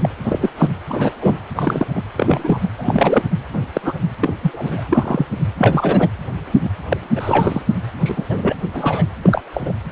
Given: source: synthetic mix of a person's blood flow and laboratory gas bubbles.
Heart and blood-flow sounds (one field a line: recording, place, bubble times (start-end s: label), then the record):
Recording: Doppler ultrasound of blood flow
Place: precordium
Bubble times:
0.01-0.09 s: bubbles
0.24-0.49 s: bubbles
0.57-0.71 s: bubbles
0.90-1.12 s: bubbles
1.20-1.37 s: bubbles
1.56-1.85 s: bubbles
1.96-2.02 s: bubbles
2.17-2.70 s: bubbles
2.78-3.23 s: bubbles
3.53-3.60 s: bubbles
3.75-3.94 s: bubbles
4.19-4.33 s: bubbles
4.41-4.81 s: bubbles
4.90-5.26 s: bubbles
5.58-6.10 s: bubbles
6.63-6.70 s: bubbles
6.88-6.97 s: bubbles
7.15-7.61 s: bubbles
8.00-8.25 s: bubbles
8.29-8.56 s: bubbles
8.74-9.05 s: bubbles
9.23-9.41 s: bubbles
9.53-9.72 s: bubbles
From the record:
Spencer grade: 3 (all of the cardiac periods contain showers or single bubble signals, but not dominating or overriding the cardiac motion signals)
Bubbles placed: anywhere in the cardiac cycle